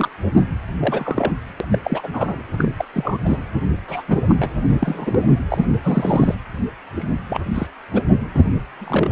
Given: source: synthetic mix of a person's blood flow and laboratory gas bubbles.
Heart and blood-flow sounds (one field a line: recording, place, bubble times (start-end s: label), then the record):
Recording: Doppler ultrasound of blood flow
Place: precordium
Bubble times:
0.00-0.09 s: bubbles
0.79-1.32 s: bubbles
1.60-1.65 s: bubbles
1.72-1.78 s: bubbles
1.84-2.08 s: bubbles
2.13-2.42 s: bubbles
2.58-2.71 s: bubbles
2.76-2.85 s: bubbles
2.92-3.18 s: bubbles
3.25-3.38 s: bubbles
3.88-4.03 s: bubbles
4.08-4.21 s: bubbles
4.28-4.50 s: bubbles
4.67-5.22 s: bubbles
5.50-5.66 s: bubbles
5.83-6.35 s: bubbles
6.96-7.14 s: bubbles
7.28-7.43 s: bubbles
7.54-7.67 s: bubbles
7.92-8.03 s: bubbles
8.34-8.42 s: bubbles
8.80-9.12 s: bubbles
From the record:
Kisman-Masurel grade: 242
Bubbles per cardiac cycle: several, 3 to 8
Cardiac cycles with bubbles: 100%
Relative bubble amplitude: moderate (0.250 to 0.450)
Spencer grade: 3 (all of the cardiac periods contain showers or single bubble signals, but not dominating or overriding the cardiac motion signals)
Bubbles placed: anywhere in the cardiac cycle